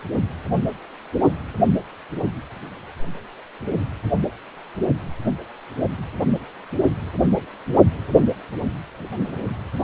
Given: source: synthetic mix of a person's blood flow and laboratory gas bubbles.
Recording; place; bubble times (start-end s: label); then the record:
Doppler ultrasound of blood flow; precordium
no bubbles
From the record:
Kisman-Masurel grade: 000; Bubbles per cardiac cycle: 0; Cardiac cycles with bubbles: 0%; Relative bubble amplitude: no bubbles discernible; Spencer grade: 0 (complete lack of bubble signals)